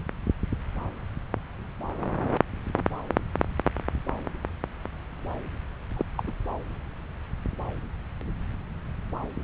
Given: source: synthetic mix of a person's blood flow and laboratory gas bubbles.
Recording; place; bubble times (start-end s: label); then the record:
Doppler ultrasound of blood flow; subclavian vein
5.96-6.05 s: bubbles
6.17-6.22 s: bubbles
6.27-6.31 s: bubbles
From the record:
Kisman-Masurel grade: 211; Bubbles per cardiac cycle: several, 3 to 8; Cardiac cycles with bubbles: 1 to 10%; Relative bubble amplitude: barely perceptible (0.100 to 0.250); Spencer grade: 1 (occasional bubble signal discernible with the cardiac motion signal, with majority of cardiac periods free of bubbles); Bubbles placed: anywhere in the cardiac cycle